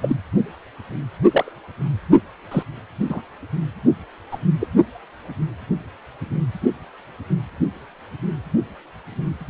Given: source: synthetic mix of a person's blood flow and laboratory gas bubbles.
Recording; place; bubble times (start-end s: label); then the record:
Doppler ultrasound of blood flow; precordium
0.02-0.15 s: bubbles
1.28-1.52 s: bubbles
2.51-2.62 s: bubbles
3.10-3.21 s: bubbles
4.31-4.38 s: bubbles
4.60-4.68 s: bubbles
From the record:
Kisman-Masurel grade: 122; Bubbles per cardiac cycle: 1 to 2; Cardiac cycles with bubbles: 10 to 50%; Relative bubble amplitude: moderate (0.250 to 0.450); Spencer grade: 2 (many but less than half of the cardiac periods contain bubble signals, singularly or in groups); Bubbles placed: only in the low amplitude regions of the cardiac cycle